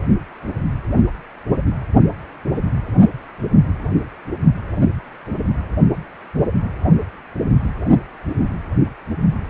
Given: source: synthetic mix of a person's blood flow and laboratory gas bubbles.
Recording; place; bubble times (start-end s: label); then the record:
Doppler ultrasound of blood flow; precordium
no bubbles
From the record:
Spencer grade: 0 (complete lack of bubble signals)